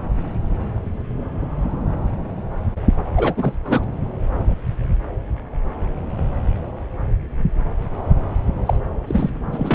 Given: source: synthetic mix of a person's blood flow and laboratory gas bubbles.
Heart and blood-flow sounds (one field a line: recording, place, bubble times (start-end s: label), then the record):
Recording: Doppler ultrasound of blood flow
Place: subclavian vein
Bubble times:
3.16-3.56 s: bubbles
3.65-3.85 s: bubbles
8.65-8.77 s: bubbles
9.07-9.32 s: bubbles
9.51-9.75 s: bubbles
From the record:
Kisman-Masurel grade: 223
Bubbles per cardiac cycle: several, 3 to 8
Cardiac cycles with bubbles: 10 to 50%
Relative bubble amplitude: loud (0.450 to 0.775)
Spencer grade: 2 (many but less than half of the cardiac periods contain bubble signals, singularly or in groups)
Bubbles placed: anywhere in the cardiac cycle